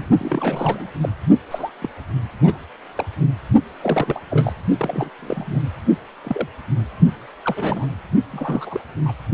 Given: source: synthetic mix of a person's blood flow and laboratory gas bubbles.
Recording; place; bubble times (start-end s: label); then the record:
Doppler ultrasound of blood flow; precordium
0.00-0.07 s: bubbles
0.18-0.90 s: bubbles
1.00-1.09 s: bubbles
1.50-1.70 s: bubbles
1.81-1.89 s: bubbles
2.43-2.58 s: bubbles
2.96-3.05 s: bubbles
3.81-4.20 s: bubbles
4.30-4.53 s: bubbles
4.78-5.10 s: bubbles
5.19-5.62 s: bubbles
6.24-6.48 s: bubbles
7.43-7.87 s: bubbles
8.31-8.80 s: bubbles
9.05-9.12 s: bubbles
From the record:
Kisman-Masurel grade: 242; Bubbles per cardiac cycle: several, 3 to 8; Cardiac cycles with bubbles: 100%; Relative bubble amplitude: moderate (0.250 to 0.450); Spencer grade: 3 (all of the cardiac periods contain showers or single bubble signals, but not dominating or overriding the cardiac motion signals); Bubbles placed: only in the low amplitude regions of the cardiac cycle